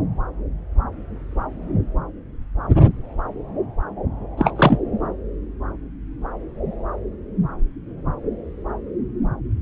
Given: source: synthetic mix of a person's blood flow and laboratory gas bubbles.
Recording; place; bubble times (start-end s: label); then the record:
Doppler ultrasound of blood flow; subclavian vein
4.37-4.53 s: bubbles
4.56-4.79 s: bubbles
From the record:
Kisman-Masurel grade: 213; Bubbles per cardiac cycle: several, 3 to 8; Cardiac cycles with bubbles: 1 to 10%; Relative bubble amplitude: loud (0.450 to 0.775); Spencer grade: 1 (occasional bubble signal discernible with the cardiac motion signal, with majority of cardiac periods free of bubbles); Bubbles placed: anywhere in the cardiac cycle